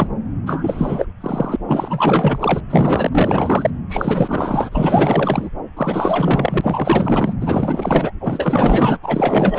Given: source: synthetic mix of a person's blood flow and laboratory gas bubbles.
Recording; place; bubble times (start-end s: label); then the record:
Doppler ultrasound of blood flow; subclavian vein
0.00-0.07 s: bubbles
0.46-1.08 s: bubbles
1.21-1.56 s: bubbles
1.68-2.61 s: bubbles
2.69-3.08 s: bubbles
3.11-3.71 s: bubbles
3.89-5.50 s: bubbles
5.77-7.33 s: bubbles
7.40-8.12 s: bubbles
8.20-8.96 s: bubbles
9.02-9.59 s: bubbles
From the record:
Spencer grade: 4 (maximum detectable bubble signal sounding continuously throughout systole and diastole of every cardiac period, and overriding the amplitude of the normal cardiac signals); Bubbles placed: anywhere in the cardiac cycle